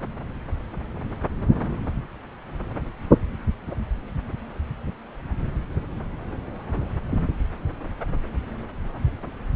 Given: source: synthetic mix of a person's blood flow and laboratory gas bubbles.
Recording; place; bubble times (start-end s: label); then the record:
Doppler ultrasound of blood flow; subclavian vein
no bubbles
From the record:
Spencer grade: 0 (complete lack of bubble signals)